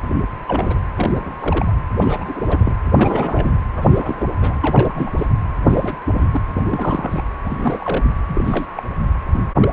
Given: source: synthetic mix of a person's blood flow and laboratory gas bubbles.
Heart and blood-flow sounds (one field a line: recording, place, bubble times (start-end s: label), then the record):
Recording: Doppler ultrasound of blood flow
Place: precordium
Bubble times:
0.02-0.10 s: bubbles
0.47-0.78 s: bubbles
0.96-1.12 s: bubbles
1.15-1.76 s: bubbles
1.99-2.76 s: bubbles
2.91-3.60 s: bubbles
3.74-4.26 s: bubbles
4.40-5.12 s: bubbles
5.17-5.26 s: bubbles
5.66-5.97 s: bubbles
6.13-6.26 s: bubbles
6.33-6.41 s: bubbles
6.53-7.22 s: bubbles
7.44-8.05 s: bubbles
8.28-8.66 s: bubbles
8.75-8.83 s: bubbles
9.33-9.45 s: bubbles
9.60-9.69 s: bubbles
From the record:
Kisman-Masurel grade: 342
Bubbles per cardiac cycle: rolling drumbeat, 9 or more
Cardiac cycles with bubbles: 100%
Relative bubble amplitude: moderate (0.250 to 0.450)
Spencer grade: 3 (all of the cardiac periods contain showers or single bubble signals, but not dominating or overriding the cardiac motion signals)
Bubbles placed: anywhere in the cardiac cycle